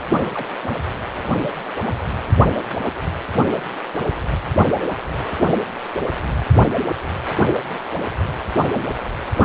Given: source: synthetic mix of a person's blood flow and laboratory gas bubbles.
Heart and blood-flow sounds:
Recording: Doppler ultrasound of blood flow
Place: precordium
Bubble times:
0.32-0.48 s: bubbles
8.74-8.83 s: bubbles
From the record:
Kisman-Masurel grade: 121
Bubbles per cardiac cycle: 1 to 2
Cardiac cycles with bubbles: 10 to 50%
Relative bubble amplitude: barely perceptible (0.100 to 0.250)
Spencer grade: 2 (many but less than half of the cardiac periods contain bubble signals, singularly or in groups)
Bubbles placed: anywhere in the cardiac cycle

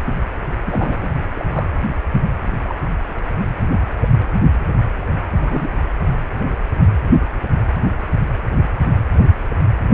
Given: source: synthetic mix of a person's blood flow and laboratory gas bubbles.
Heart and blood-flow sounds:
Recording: Doppler ultrasound of blood flow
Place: precordium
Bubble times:
0.65-1.07 s: bubbles
1.34-1.46 s: bubbles
1.51-1.67 s: bubbles
2.65-2.75 s: bubbles
3.99-4.08 s: bubbles
5.33-5.69 s: bubbles
From the record:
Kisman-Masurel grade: 122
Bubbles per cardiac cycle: 1 to 2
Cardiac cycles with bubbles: 10 to 50%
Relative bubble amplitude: moderate (0.250 to 0.450)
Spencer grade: 2 (many but less than half of the cardiac periods contain bubble signals, singularly or in groups)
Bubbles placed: anywhere in the cardiac cycle

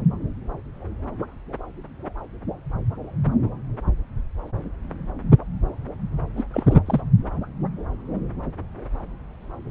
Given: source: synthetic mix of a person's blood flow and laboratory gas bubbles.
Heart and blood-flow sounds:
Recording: Doppler ultrasound of blood flow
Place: subclavian vein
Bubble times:
6.37-6.43 s: bubbles
6.54-6.78 s: bubbles
6.87-7.01 s: bubbles
From the record:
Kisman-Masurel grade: 212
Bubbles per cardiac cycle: several, 3 to 8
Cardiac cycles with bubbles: 1 to 10%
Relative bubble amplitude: moderate (0.250 to 0.450)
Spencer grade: 1 (occasional bubble signal discernible with the cardiac motion signal, with majority of cardiac periods free of bubbles)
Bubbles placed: anywhere in the cardiac cycle

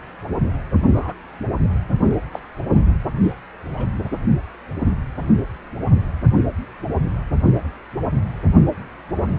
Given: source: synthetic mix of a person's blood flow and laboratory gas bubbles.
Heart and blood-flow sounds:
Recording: Doppler ultrasound of blood flow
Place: precordium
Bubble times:
0.92-1.14 s: bubbles
2.06-2.17 s: bubbles
2.31-2.40 s: bubbles
3.22-3.32 s: bubbles
3.73-3.88 s: bubbles
From the record:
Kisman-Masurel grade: 121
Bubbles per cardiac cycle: 1 to 2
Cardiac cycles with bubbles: 10 to 50%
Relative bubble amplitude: barely perceptible (0.100 to 0.250)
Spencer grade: 2 (many but less than half of the cardiac periods contain bubble signals, singularly or in groups)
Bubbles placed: anywhere in the cardiac cycle

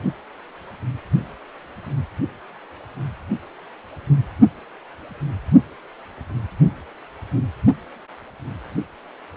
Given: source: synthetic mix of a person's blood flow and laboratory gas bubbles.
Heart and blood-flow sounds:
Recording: Doppler ultrasound of blood flow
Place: precordium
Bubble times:
no bubbles
From the record:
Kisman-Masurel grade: 000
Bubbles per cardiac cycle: 0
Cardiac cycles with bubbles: 0%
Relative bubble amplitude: no bubbles discernible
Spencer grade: 0 (complete lack of bubble signals)

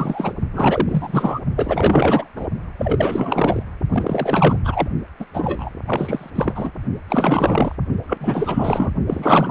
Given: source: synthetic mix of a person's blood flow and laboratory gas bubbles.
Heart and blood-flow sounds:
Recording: Doppler ultrasound of blood flow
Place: precordium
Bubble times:
0.00-0.33 s: bubbles
0.53-1.40 s: bubbles
1.56-2.29 s: bubbles
2.35-2.48 s: bubbles
2.77-3.62 s: bubbles
3.90-4.57 s: bubbles
4.64-4.88 s: bubbles
5.20-5.25 s: bubbles
5.33-5.70 s: bubbles
5.87-6.30 s: bubbles
6.35-6.71 s: bubbles
7.08-7.75 s: bubbles
8.07-8.91 s: bubbles
9.07-9.51 s: bubbles
From the record:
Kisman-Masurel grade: 444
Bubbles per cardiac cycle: continuous sound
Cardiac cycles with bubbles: 100%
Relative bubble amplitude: maximal (0.775 to 0.999)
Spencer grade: 4 (maximum detectable bubble signal sounding continuously throughout systole and diastole of every cardiac period, and overriding the amplitude of the normal cardiac signals)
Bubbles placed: only in the low amplitude regions of the cardiac cycle

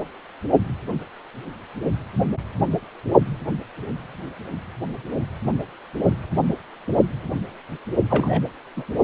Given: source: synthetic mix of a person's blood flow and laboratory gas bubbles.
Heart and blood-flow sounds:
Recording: Doppler ultrasound of blood flow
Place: precordium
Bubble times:
8.09-8.41 s: bubbles
8.76-8.84 s: bubbles
From the record:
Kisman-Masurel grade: 212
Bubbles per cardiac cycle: several, 3 to 8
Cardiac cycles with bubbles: 1 to 10%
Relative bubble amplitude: moderate (0.250 to 0.450)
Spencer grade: 1 (occasional bubble signal discernible with the cardiac motion signal, with majority of cardiac periods free of bubbles)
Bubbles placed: only in the low amplitude regions of the cardiac cycle

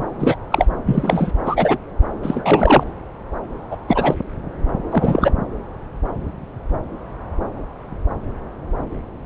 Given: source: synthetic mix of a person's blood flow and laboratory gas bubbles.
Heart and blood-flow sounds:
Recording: Doppler ultrasound of blood flow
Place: subclavian vein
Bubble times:
0.00-0.04 s: bubbles
0.19-0.35 s: bubbles
0.51-0.65 s: bubbles
0.85-1.31 s: bubbles
1.45-1.77 s: bubbles
2.23-2.83 s: bubbles
3.71-3.77 s: bubbles
3.88-4.14 s: bubbles
4.90-5.31 s: bubbles
From the record:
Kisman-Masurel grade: 233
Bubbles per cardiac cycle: several, 3 to 8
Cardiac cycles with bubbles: 50 to 99%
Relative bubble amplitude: loud (0.450 to 0.775)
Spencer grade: 3 (all of the cardiac periods contain showers or single bubble signals, but not dominating or overriding the cardiac motion signals)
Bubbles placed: anywhere in the cardiac cycle

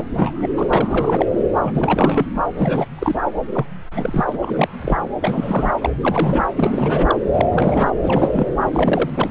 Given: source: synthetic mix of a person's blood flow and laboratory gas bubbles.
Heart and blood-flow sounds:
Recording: Doppler ultrasound of blood flow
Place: subclavian vein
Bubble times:
0.00-0.04 s: bubbles
0.14-0.49 s: bubbles
0.56-0.67 s: bubbles
0.70-1.26 s: bubbles
1.64-2.25 s: bubbles
2.57-2.86 s: bubbles
2.98-3.15 s: bubbles
3.54-3.66 s: bubbles
3.95-4.38 s: bubbles
4.43-4.68 s: bubbles
4.82-4.98 s: bubbles
5.21-5.72 s: bubbles
5.82-5.90 s: bubbles
6.00-6.43 s: bubbles
6.57-7.16 s: bubbles
7.33-7.46 s: bubbles
7.51-7.93 s: bubbles
8.04-8.46 s: bubbles
8.60-9.31 s: bubbles
From the record:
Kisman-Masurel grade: 343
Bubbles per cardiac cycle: rolling drumbeat, 9 or more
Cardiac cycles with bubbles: 100%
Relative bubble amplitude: loud (0.450 to 0.775)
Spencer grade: 3 (all of the cardiac periods contain showers or single bubble signals, but not dominating or overriding the cardiac motion signals)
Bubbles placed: anywhere in the cardiac cycle

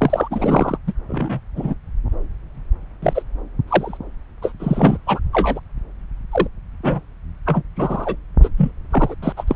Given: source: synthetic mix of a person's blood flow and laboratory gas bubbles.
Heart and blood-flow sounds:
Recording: Doppler ultrasound of blood flow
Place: subclavian vein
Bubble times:
0.01-0.28 s: bubbles
0.31-0.78 s: bubbles
0.87-0.92 s: bubbles
1.08-1.40 s: bubbles
1.56-1.74 s: bubbles
3.02-3.23 s: bubbles
3.67-3.98 s: bubbles
4.42-4.52 s: bubbles
4.59-4.97 s: bubbles
5.07-5.20 s: bubbles
5.33-5.59 s: bubbles
6.32-6.47 s: bubbles
6.83-7.00 s: bubbles
7.46-7.63 s: bubbles
7.76-8.16 s: bubbles
8.42-8.49 s: bubbles
8.57-8.71 s: bubbles
8.90-9.15 s: bubbles
9.22-9.32 s: bubbles
9.36-9.44 s: bubbles
9.47-9.56 s: bubbles
From the record:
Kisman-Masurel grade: 243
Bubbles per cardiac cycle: several, 3 to 8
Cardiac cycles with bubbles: 100%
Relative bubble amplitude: loud (0.450 to 0.775)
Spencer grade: 3 (all of the cardiac periods contain showers or single bubble signals, but not dominating or overriding the cardiac motion signals)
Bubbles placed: anywhere in the cardiac cycle

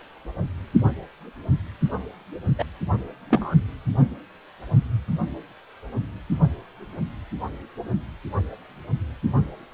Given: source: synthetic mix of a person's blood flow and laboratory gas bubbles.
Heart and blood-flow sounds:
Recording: Doppler ultrasound of blood flow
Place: precordium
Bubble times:
2.58-2.64 s: bubbles
3.30-3.55 s: bubbles
From the record:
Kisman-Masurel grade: 113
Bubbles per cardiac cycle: 1 to 2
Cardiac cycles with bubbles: 1 to 10%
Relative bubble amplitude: loud (0.450 to 0.775)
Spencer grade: 1 (occasional bubble signal discernible with the cardiac motion signal, with majority of cardiac periods free of bubbles)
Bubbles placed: only in the low amplitude regions of the cardiac cycle

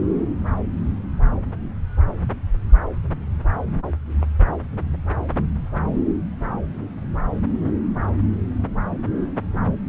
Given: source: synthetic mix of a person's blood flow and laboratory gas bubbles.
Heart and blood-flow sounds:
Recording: Doppler ultrasound of blood flow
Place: subclavian vein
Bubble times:
no bubbles
From the record:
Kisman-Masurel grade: 000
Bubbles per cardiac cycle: 0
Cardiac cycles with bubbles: 0%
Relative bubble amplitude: no bubbles discernible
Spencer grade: 0 (complete lack of bubble signals)

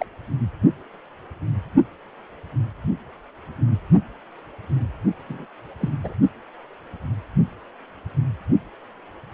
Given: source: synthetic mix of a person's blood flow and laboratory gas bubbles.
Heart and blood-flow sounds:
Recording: Doppler ultrasound of blood flow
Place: precordium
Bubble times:
0.00-0.06 s: bubbles
5.21-5.46 s: bubbles
5.81-5.90 s: bubbles
6.04-6.13 s: bubbles
From the record:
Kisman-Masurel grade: 221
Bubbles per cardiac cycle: several, 3 to 8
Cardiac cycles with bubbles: 10 to 50%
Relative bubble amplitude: barely perceptible (0.100 to 0.250)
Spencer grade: 2 (many but less than half of the cardiac periods contain bubble signals, singularly or in groups)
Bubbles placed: only in the low amplitude regions of the cardiac cycle

